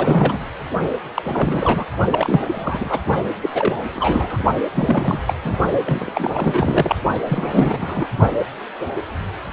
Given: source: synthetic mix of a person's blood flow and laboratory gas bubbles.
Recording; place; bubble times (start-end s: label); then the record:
Doppler ultrasound of blood flow; precordium
0.00-0.40 s: bubbles
1.15-1.84 s: bubbles
2.12-2.41 s: bubbles
2.51-3.00 s: bubbles
3.41-3.50 s: bubbles
3.54-3.76 s: bubbles
3.94-4.43 s: bubbles
4.75-5.20 s: bubbles
5.27-5.33 s: bubbles
5.44-5.57 s: bubbles
5.84-6.96 s: bubbles
7.27-8.09 s: bubbles
From the record:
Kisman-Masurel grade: 332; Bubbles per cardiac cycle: rolling drumbeat, 9 or more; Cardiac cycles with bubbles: 50 to 99%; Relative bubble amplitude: moderate (0.250 to 0.450); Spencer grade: 3 (all of the cardiac periods contain showers or single bubble signals, but not dominating or overriding the cardiac motion signals); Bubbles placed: only in the low amplitude regions of the cardiac cycle